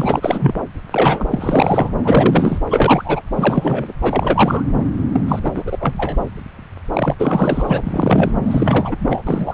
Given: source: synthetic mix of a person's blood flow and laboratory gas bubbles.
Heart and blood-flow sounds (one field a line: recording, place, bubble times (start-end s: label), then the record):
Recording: Doppler ultrasound of blood flow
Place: subclavian vein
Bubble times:
0.00-0.54 s: bubbles
0.78-0.81 s: bubbles
0.91-1.26 s: bubbles
1.30-1.90 s: bubbles
2.04-2.59 s: bubbles
2.71-3.21 s: bubbles
3.35-3.94 s: bubbles
4.02-4.64 s: bubbles
5.12-5.24 s: bubbles
5.28-5.40 s: bubbles
5.44-5.51 s: bubbles
5.55-5.77 s: bubbles
5.80-5.94 s: bubbles
5.97-6.17 s: bubbles
6.93-7.16 s: bubbles
7.19-8.31 s: bubbles
8.45-8.96 s: bubbles
9.00-9.22 s: bubbles
9.27-9.54 s: bubbles
From the record:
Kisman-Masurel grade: 333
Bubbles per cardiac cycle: rolling drumbeat, 9 or more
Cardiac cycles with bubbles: 50 to 99%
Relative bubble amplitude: loud (0.450 to 0.775)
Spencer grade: 3 (all of the cardiac periods contain showers or single bubble signals, but not dominating or overriding the cardiac motion signals)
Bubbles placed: anywhere in the cardiac cycle